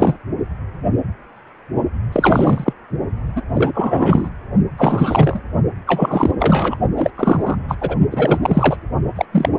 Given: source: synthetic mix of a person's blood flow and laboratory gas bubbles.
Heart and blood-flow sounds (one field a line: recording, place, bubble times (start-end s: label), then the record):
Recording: Doppler ultrasound of blood flow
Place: precordium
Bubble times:
0.00-0.17 s: bubbles
2.12-2.73 s: bubbles
3.35-3.42 s: bubbles
3.53-4.30 s: bubbles
4.77-5.40 s: bubbles
5.87-6.31 s: bubbles
6.38-6.76 s: bubbles
6.96-7.10 s: bubbles
7.17-7.56 s: bubbles
7.68-7.75 s: bubbles
7.81-7.96 s: bubbles
8.11-8.39 s: bubbles
8.42-8.77 s: bubbles
9.15-9.25 s: bubbles
9.32-9.49 s: bubbles
From the record:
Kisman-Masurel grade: 333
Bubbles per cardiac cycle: rolling drumbeat, 9 or more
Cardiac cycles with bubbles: 50 to 99%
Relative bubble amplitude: loud (0.450 to 0.775)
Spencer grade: 3 (all of the cardiac periods contain showers or single bubble signals, but not dominating or overriding the cardiac motion signals)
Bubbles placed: only in the low amplitude regions of the cardiac cycle